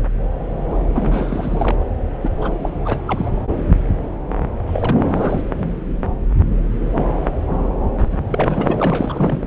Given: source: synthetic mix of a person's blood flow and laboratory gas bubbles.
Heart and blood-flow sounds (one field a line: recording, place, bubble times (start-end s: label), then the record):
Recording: Doppler ultrasound of blood flow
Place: subclavian vein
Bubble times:
0.95-1.77 s: bubbles
1.79-1.85 s: bubbles
2.22-2.29 s: bubbles
2.36-2.55 s: bubbles
2.62-2.69 s: bubbles
2.85-3.00 s: bubbles
3.06-3.30 s: bubbles
4.66-5.42 s: bubbles
7.98-8.17 s: bubbles
8.21-8.75 s: bubbles
8.77-9.47 s: bubbles
From the record:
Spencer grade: 3 (all of the cardiac periods contain showers or single bubble signals, but not dominating or overriding the cardiac motion signals)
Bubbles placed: anywhere in the cardiac cycle